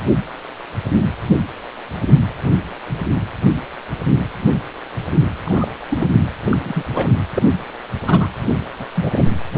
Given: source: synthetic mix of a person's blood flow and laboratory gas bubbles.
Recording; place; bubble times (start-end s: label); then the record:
Doppler ultrasound of blood flow; precordium
5.44-5.68 s: bubbles
5.91-6.07 s: bubbles
6.46-6.57 s: bubbles
6.64-6.84 s: bubbles
6.89-7.08 s: bubbles
7.34-7.42 s: bubbles
8.06-8.29 s: bubbles
8.50-8.57 s: bubbles
8.79-8.86 s: bubbles
8.94-9.24 s: bubbles
From the record:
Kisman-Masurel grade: 222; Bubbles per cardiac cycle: several, 3 to 8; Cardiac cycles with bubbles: 10 to 50%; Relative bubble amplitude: moderate (0.250 to 0.450); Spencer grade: 2 (many but less than half of the cardiac periods contain bubble signals, singularly or in groups); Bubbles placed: anywhere in the cardiac cycle